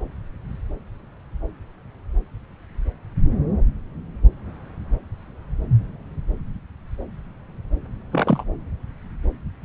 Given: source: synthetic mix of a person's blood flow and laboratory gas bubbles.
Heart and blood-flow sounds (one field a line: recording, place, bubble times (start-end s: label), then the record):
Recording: Doppler ultrasound of blood flow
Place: subclavian vein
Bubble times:
8.12-8.44 s: bubbles
From the record:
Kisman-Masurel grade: 112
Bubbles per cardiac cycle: 1 to 2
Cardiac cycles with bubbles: 1 to 10%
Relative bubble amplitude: moderate (0.250 to 0.450)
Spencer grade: 1 (occasional bubble signal discernible with the cardiac motion signal, with majority of cardiac periods free of bubbles)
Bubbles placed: anywhere in the cardiac cycle